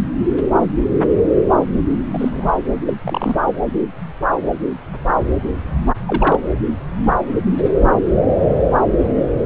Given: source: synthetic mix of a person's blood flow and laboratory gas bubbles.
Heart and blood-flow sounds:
Doppler ultrasound of blood flow; subclavian vein
2.13-2.48 s: bubbles
2.86-2.94 s: bubbles
3.02-3.36 s: bubbles
6.05-6.39 s: bubbles
From the record:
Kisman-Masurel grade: 122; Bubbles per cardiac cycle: 1 to 2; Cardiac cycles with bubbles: 10 to 50%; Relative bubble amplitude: moderate (0.250 to 0.450); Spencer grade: 2 (many but less than half of the cardiac periods contain bubble signals, singularly or in groups); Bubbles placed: anywhere in the cardiac cycle

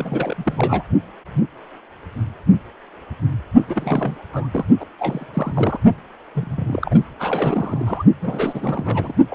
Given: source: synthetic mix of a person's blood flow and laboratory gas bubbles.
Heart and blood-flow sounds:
Doppler ultrasound of blood flow; precordium
0.00-0.83 s: bubbles
3.67-4.16 s: bubbles
4.32-4.48 s: bubbles
4.53-4.65 s: bubbles
4.80-4.85 s: bubbles
4.99-5.26 s: bubbles
5.33-5.80 s: bubbles
6.35-7.01 s: bubbles
7.19-8.04 s: bubbles
8.21-9.14 s: bubbles
9.29-9.35 s: bubbles
From the record:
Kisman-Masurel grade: 332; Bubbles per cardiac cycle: rolling drumbeat, 9 or more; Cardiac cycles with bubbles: 50 to 99%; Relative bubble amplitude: moderate (0.250 to 0.450); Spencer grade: 3 (all of the cardiac periods contain showers or single bubble signals, but not dominating or overriding the cardiac motion signals); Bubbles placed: only in the low amplitude regions of the cardiac cycle

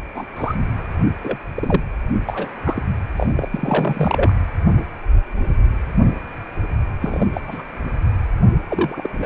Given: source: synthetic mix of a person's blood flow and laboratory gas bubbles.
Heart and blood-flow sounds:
Doppler ultrasound of blood flow; precordium
0.14-0.25 s: bubbles
0.36-0.55 s: bubbles
1.22-1.37 s: bubbles
1.55-1.83 s: bubbles
2.26-2.50 s: bubbles
2.64-2.83 s: bubbles
3.16-3.48 s: bubbles
3.51-4.33 s: bubbles
7.00-7.26 s: bubbles
7.33-7.41 s: bubbles
7.47-7.62 s: bubbles
8.69-9.10 s: bubbles
9.19-9.26 s: bubbles
From the record:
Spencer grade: 3 (all of the cardiac periods contain showers or single bubble signals, but not dominating or overriding the cardiac motion signals); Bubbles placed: anywhere in the cardiac cycle

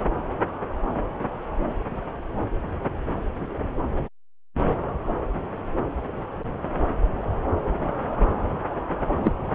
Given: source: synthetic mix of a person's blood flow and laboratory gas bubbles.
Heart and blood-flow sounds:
Doppler ultrasound of blood flow; subclavian vein
9.23-9.31 s: bubbles
From the record:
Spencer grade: 2 (many but less than half of the cardiac periods contain bubble signals, singularly or in groups); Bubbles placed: anywhere in the cardiac cycle

